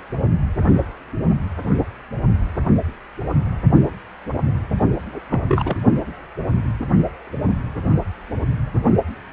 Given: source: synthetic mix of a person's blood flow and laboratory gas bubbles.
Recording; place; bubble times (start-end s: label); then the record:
Doppler ultrasound of blood flow; precordium
5.12-5.19 s: bubbles
5.30-5.76 s: bubbles
From the record:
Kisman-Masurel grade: 212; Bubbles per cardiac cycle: several, 3 to 8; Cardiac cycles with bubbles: 1 to 10%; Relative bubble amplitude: moderate (0.250 to 0.450); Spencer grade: 1 (occasional bubble signal discernible with the cardiac motion signal, with majority of cardiac periods free of bubbles); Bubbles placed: only in the low amplitude regions of the cardiac cycle